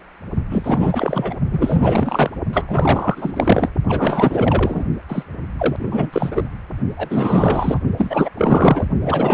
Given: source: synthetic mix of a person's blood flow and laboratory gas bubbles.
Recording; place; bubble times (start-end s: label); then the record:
Doppler ultrasound of blood flow; precordium
0.51-1.34 s: bubbles
1.51-2.31 s: bubbles
2.53-3.69 s: bubbles
3.88-4.85 s: bubbles
5.09-5.23 s: bubbles
5.57-6.49 s: bubbles
6.96-7.79 s: bubbles
7.96-8.29 s: bubbles
8.37-8.86 s: bubbles
9.00-9.34 s: bubbles
From the record:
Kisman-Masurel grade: 444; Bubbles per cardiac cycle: continuous sound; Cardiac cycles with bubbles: 100%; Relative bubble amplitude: maximal (0.775 to 0.999); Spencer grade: 4 (maximum detectable bubble signal sounding continuously throughout systole and diastole of every cardiac period, and overriding the amplitude of the normal cardiac signals); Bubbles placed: only in the low amplitude regions of the cardiac cycle